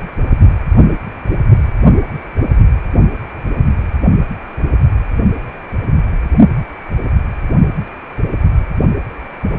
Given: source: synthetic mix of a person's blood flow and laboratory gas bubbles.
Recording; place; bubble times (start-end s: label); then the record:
Doppler ultrasound of blood flow; precordium
9.49-9.59 s: bubbles
From the record:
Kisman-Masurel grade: 112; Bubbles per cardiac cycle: 1 to 2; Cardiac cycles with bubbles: 1 to 10%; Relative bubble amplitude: moderate (0.250 to 0.450); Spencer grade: 1 (occasional bubble signal discernible with the cardiac motion signal, with majority of cardiac periods free of bubbles); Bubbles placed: only in the low amplitude regions of the cardiac cycle